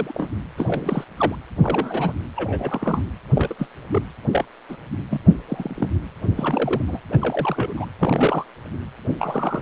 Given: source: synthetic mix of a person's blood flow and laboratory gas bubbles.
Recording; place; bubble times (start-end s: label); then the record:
Doppler ultrasound of blood flow; precordium
0.00-0.29 s: bubbles
0.56-1.04 s: bubbles
1.17-1.35 s: bubbles
1.62-2.12 s: bubbles
2.36-3.03 s: bubbles
3.35-3.54 s: bubbles
3.58-3.67 s: bubbles
3.92-4.03 s: bubbles
4.32-4.45 s: bubbles
4.69-4.77 s: bubbles
5.11-5.20 s: bubbles
5.48-5.90 s: bubbles
6.37-6.82 s: bubbles
6.87-7.00 s: bubbles
7.12-7.17 s: bubbles
7.21-7.74 s: bubbles
7.77-7.86 s: bubbles
7.99-8.46 s: bubbles
9.19-9.62 s: bubbles
From the record:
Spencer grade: 3 (all of the cardiac periods contain showers or single bubble signals, but not dominating or overriding the cardiac motion signals); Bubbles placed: anywhere in the cardiac cycle